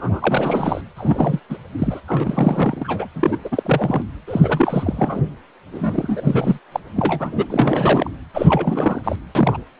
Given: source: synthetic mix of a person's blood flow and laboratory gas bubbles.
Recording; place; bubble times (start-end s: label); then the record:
Doppler ultrasound of blood flow; precordium
0.00-0.81 s: bubbles
0.96-1.40 s: bubbles
1.49-1.57 s: bubbles
1.78-2.01 s: bubbles
2.07-3.08 s: bubbles
3.13-3.38 s: bubbles
3.44-4.03 s: bubbles
4.27-5.22 s: bubbles
5.71-6.58 s: bubbles
6.72-6.80 s: bubbles
6.96-7.46 s: bubbles
7.50-8.11 s: bubbles
8.33-9.01 s: bubbles
9.04-9.16 s: bubbles
9.35-9.57 s: bubbles
From the record:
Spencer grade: 3 (all of the cardiac periods contain showers or single bubble signals, but not dominating or overriding the cardiac motion signals); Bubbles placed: anywhere in the cardiac cycle